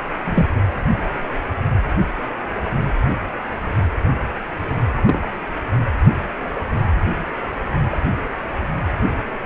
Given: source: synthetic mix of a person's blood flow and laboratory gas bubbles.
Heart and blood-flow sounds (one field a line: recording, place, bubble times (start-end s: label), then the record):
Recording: Doppler ultrasound of blood flow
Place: precordium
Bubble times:
0.24-0.47 s: bubbles
5.05-5.29 s: bubbles
6.74-6.82 s: bubbles
7.92-7.97 s: bubbles
From the record:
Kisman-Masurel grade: 122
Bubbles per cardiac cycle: 1 to 2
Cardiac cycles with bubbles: 10 to 50%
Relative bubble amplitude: moderate (0.250 to 0.450)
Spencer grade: 2 (many but less than half of the cardiac periods contain bubble signals, singularly or in groups)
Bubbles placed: anywhere in the cardiac cycle